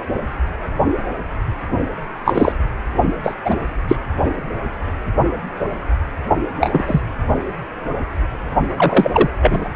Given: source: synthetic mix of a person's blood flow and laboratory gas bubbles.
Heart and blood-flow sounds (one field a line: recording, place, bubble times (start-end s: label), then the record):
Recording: Doppler ultrasound of blood flow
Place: precordium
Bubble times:
2.25-2.52 s: bubbles
3.23-3.34 s: bubbles
3.44-3.55 s: bubbles
3.89-3.95 s: bubbles
6.61-7.01 s: bubbles
8.76-9.30 s: bubbles
9.41-9.68 s: bubbles
From the record:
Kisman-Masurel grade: 233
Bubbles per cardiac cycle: several, 3 to 8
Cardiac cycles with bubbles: 50 to 99%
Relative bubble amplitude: loud (0.450 to 0.775)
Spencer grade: 3 (all of the cardiac periods contain showers or single bubble signals, but not dominating or overriding the cardiac motion signals)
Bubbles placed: only in the low amplitude regions of the cardiac cycle